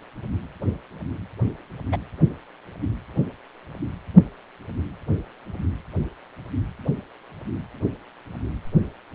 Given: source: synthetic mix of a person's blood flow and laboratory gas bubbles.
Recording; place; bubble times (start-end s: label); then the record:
Doppler ultrasound of blood flow; precordium
1.92-1.97 s: bubbles
From the record:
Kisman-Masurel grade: 112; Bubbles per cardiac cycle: 1 to 2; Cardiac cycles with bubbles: 1 to 10%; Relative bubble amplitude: moderate (0.250 to 0.450); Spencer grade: 1 (occasional bubble signal discernible with the cardiac motion signal, with majority of cardiac periods free of bubbles); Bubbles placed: anywhere in the cardiac cycle